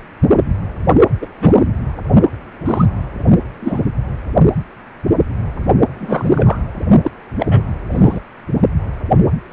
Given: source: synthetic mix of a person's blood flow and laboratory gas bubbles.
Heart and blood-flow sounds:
Doppler ultrasound of blood flow; precordium
1.21-1.27 s: bubbles
1.39-1.64 s: bubbles
2.66-2.85 s: bubbles
3.60-3.81 s: bubbles
5.94-6.58 s: bubbles
7.02-7.11 s: bubbles
7.38-7.62 s: bubbles
7.91-8.20 s: bubbles
From the record:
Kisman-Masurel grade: 223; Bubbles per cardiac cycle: several, 3 to 8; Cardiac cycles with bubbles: 10 to 50%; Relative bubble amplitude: loud (0.450 to 0.775); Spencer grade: 2 (many but less than half of the cardiac periods contain bubble signals, singularly or in groups); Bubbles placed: only in the low amplitude regions of the cardiac cycle

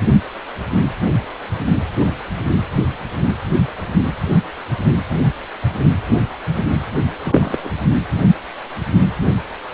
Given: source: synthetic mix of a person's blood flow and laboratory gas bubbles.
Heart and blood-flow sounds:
Doppler ultrasound of blood flow; precordium
7.22-7.74 s: bubbles
From the record:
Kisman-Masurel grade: 212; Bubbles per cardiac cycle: several, 3 to 8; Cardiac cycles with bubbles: 1 to 10%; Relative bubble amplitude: moderate (0.250 to 0.450); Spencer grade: 1 (occasional bubble signal discernible with the cardiac motion signal, with majority of cardiac periods free of bubbles); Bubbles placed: anywhere in the cardiac cycle

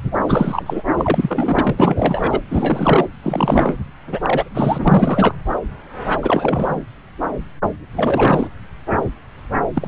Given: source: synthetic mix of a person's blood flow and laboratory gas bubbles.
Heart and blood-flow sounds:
Doppler ultrasound of blood flow; subclavian vein
0.25-0.82 s: bubbles
0.98-1.75 s: bubbles
1.77-2.40 s: bubbles
2.49-3.09 s: bubbles
3.23-3.75 s: bubbles
4.12-4.19 s: bubbles
4.24-4.49 s: bubbles
4.54-5.34 s: bubbles
6.22-6.80 s: bubbles
7.96-8.47 s: bubbles
9.73-9.88 s: bubbles
From the record:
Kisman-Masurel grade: 333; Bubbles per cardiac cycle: rolling drumbeat, 9 or more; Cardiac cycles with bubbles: 50 to 99%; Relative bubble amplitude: loud (0.450 to 0.775); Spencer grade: 3 (all of the cardiac periods contain showers or single bubble signals, but not dominating or overriding the cardiac motion signals); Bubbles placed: anywhere in the cardiac cycle

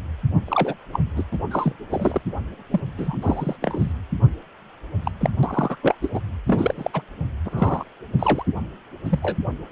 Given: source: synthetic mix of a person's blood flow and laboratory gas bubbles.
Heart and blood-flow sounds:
Doppler ultrasound of blood flow; precordium
0.48-0.74 s: bubbles
0.93-1.00 s: bubbles
1.16-1.23 s: bubbles
1.32-1.38 s: bubbles
1.51-1.73 s: bubbles
1.90-2.21 s: bubbles
2.72-2.81 s: bubbles
2.96-3.18 s: bubbles
3.22-3.56 s: bubbles
3.62-3.91 s: bubbles
5.04-5.11 s: bubbles
5.20-5.30 s: bubbles
5.43-5.76 s: bubbles
5.82-5.95 s: bubbles
6.02-6.11 s: bubbles
6.13-6.21 s: bubbles
6.46-6.91 s: bubbles
6.93-7.02 s: bubbles
7.44-7.83 s: bubbles
8.19-8.43 s: bubbles
9.04-9.19 s: bubbles
9.22-9.38 s: bubbles
From the record:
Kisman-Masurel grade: 242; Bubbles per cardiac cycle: several, 3 to 8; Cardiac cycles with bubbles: 100%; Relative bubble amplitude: moderate (0.250 to 0.450); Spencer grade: 3 (all of the cardiac periods contain showers or single bubble signals, but not dominating or overriding the cardiac motion signals); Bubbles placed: anywhere in the cardiac cycle

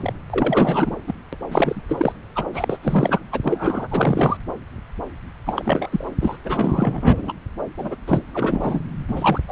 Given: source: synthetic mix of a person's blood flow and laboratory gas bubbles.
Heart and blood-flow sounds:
Doppler ultrasound of blood flow; subclavian vein
0.00-0.13 s: bubbles
0.30-0.96 s: bubbles
1.07-1.14 s: bubbles
1.32-1.36 s: bubbles
1.51-1.80 s: bubbles
1.88-2.12 s: bubbles
2.35-2.45 s: bubbles
2.54-2.78 s: bubbles
2.83-3.20 s: bubbles
3.32-3.41 s: bubbles
3.43-3.88 s: bubbles
3.91-4.37 s: bubbles
5.46-6.06 s: bubbles
6.20-6.38 s: bubbles
6.44-7.33 s: bubbles
7.77-7.96 s: bubbles
8.07-8.22 s: bubbles
8.33-8.81 s: bubbles
9.08-9.40 s: bubbles
9.47-9.52 s: bubbles
From the record:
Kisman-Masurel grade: 333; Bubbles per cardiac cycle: rolling drumbeat, 9 or more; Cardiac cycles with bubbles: 50 to 99%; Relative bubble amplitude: loud (0.450 to 0.775); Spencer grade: 3 (all of the cardiac periods contain showers or single bubble signals, but not dominating or overriding the cardiac motion signals); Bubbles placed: anywhere in the cardiac cycle

